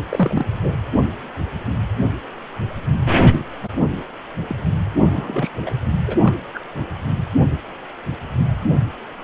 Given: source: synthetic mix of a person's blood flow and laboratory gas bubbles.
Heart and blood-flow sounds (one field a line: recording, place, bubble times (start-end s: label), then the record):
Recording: Doppler ultrasound of blood flow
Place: precordium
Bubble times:
0.10-0.45 s: bubbles
0.62-0.75 s: bubbles
3.33-3.40 s: bubbles
3.64-3.68 s: bubbles
4.49-4.55 s: bubbles
4.99-5.50 s: bubbles
5.65-5.71 s: bubbles
6.06-6.17 s: bubbles
6.21-6.33 s: bubbles
6.54-6.60 s: bubbles
From the record:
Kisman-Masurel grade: 222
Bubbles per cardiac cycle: several, 3 to 8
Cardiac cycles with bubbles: 10 to 50%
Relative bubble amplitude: moderate (0.250 to 0.450)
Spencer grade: 2 (many but less than half of the cardiac periods contain bubble signals, singularly or in groups)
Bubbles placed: anywhere in the cardiac cycle